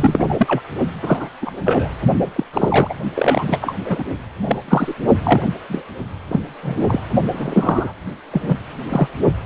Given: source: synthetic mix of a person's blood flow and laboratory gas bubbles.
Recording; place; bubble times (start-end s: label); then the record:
Doppler ultrasound of blood flow; precordium
0.00-0.35 s: bubbles
0.37-0.62 s: bubbles
1.02-1.28 s: bubbles
1.42-1.51 s: bubbles
1.61-1.89 s: bubbles
2.35-2.44 s: bubbles
2.53-2.94 s: bubbles
3.16-3.75 s: bubbles
3.86-4.04 s: bubbles
4.46-4.56 s: bubbles
4.68-4.95 s: bubbles
5.23-5.42 s: bubbles
5.69-5.83 s: bubbles
6.28-6.41 s: bubbles
6.62-7.00 s: bubbles
7.32-7.92 s: bubbles
8.31-8.56 s: bubbles
8.89-9.08 s: bubbles
From the record:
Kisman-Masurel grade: 243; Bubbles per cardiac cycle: several, 3 to 8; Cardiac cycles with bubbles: 100%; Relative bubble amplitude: loud (0.450 to 0.775); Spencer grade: 3 (all of the cardiac periods contain showers or single bubble signals, but not dominating or overriding the cardiac motion signals); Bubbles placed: only in the low amplitude regions of the cardiac cycle